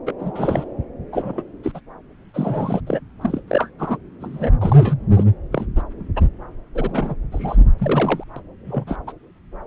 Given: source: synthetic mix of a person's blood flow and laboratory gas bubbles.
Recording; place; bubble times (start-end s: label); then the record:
Doppler ultrasound of blood flow; subclavian vein
0.06-0.12 s: bubbles
0.19-0.31 s: bubbles
0.35-0.64 s: bubbles
1.12-1.43 s: bubbles
1.63-1.71 s: bubbles
1.74-1.80 s: bubbles
2.34-2.81 s: bubbles
2.87-3.00 s: bubbles
3.21-3.41 s: bubbles
3.48-3.70 s: bubbles
3.79-3.97 s: bubbles
4.20-4.52 s: bubbles
4.61-4.95 s: bubbles
5.13-5.25 s: bubbles
5.52-5.66 s: bubbles
5.75-5.83 s: bubbles
6.16-6.21 s: bubbles
6.75-7.15 s: bubbles
7.32-7.66 s: bubbles
7.78-8.23 s: bubbles
8.36-8.39 s: bubbles
8.67-8.84 s: bubbles
8.86-8.96 s: bubbles
9.07-9.12 s: bubbles
From the record:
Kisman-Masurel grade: 242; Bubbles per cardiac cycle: several, 3 to 8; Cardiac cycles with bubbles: 100%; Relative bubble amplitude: moderate (0.250 to 0.450); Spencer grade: 3 (all of the cardiac periods contain showers or single bubble signals, but not dominating or overriding the cardiac motion signals); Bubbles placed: anywhere in the cardiac cycle